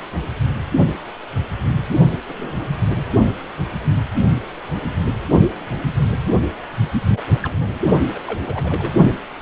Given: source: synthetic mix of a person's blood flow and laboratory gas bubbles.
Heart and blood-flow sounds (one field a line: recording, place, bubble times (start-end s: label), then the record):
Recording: Doppler ultrasound of blood flow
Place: precordium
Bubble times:
2.27-2.58 s: bubbles
2.95-3.04 s: bubbles
7.09-7.21 s: bubbles
7.43-7.79 s: bubbles
8.14-8.20 s: bubbles
8.27-8.93 s: bubbles
From the record:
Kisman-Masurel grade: 221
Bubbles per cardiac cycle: several, 3 to 8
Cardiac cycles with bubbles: 10 to 50%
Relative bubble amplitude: barely perceptible (0.100 to 0.250)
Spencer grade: 2 (many but less than half of the cardiac periods contain bubble signals, singularly or in groups)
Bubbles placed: only in the low amplitude regions of the cardiac cycle